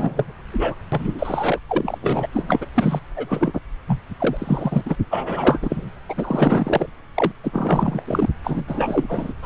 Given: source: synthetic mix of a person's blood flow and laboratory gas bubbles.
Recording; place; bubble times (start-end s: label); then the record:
Doppler ultrasound of blood flow; subclavian vein
0.00-0.32 s: bubbles
0.52-0.74 s: bubbles
0.92-1.58 s: bubbles
1.68-1.98 s: bubbles
2.02-2.28 s: bubbles
2.33-2.66 s: bubbles
2.74-3.00 s: bubbles
3.16-3.60 s: bubbles
3.87-4.02 s: bubbles
4.18-4.96 s: bubbles
5.10-5.92 s: bubbles
6.08-6.14 s: bubbles
6.17-6.86 s: bubbles
7.14-7.32 s: bubbles
7.43-8.03 s: bubbles
8.06-8.28 s: bubbles
8.44-8.63 s: bubbles
8.67-9.34 s: bubbles
9.42-9.46 s: bubbles
From the record:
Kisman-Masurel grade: 342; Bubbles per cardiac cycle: rolling drumbeat, 9 or more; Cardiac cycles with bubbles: 100%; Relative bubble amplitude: moderate (0.250 to 0.450); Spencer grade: 3 (all of the cardiac periods contain showers or single bubble signals, but not dominating or overriding the cardiac motion signals); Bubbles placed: anywhere in the cardiac cycle